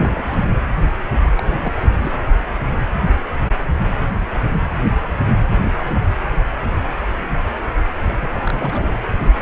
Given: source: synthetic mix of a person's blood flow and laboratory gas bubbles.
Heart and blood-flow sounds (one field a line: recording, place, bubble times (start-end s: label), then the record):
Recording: Doppler ultrasound of blood flow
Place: precordium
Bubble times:
0.00-0.40 s: bubbles
0.44-0.55 s: bubbles
1.35-1.73 s: bubbles
1.99-2.11 s: bubbles
5.60-5.72 s: bubbles
5.88-6.14 s: bubbles
8.20-8.99 s: bubbles
9.20-9.31 s: bubbles
9.36-9.42 s: bubbles
From the record:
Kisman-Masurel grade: 221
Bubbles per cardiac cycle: several, 3 to 8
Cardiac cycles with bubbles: 10 to 50%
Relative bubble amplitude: barely perceptible (0.100 to 0.250)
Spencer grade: 2 (many but less than half of the cardiac periods contain bubble signals, singularly or in groups)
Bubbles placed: anywhere in the cardiac cycle